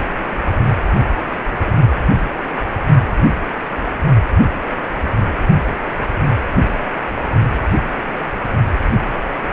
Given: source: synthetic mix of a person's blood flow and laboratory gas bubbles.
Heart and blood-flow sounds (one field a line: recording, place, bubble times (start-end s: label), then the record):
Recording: Doppler ultrasound of blood flow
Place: precordium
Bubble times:
1.52-1.88 s: bubbles
1.96-2.02 s: bubbles
From the record:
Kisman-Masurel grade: 111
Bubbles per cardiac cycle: 1 to 2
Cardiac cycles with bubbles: 1 to 10%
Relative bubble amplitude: barely perceptible (0.100 to 0.250)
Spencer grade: 1 (occasional bubble signal discernible with the cardiac motion signal, with majority of cardiac periods free of bubbles)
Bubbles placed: only in the low amplitude regions of the cardiac cycle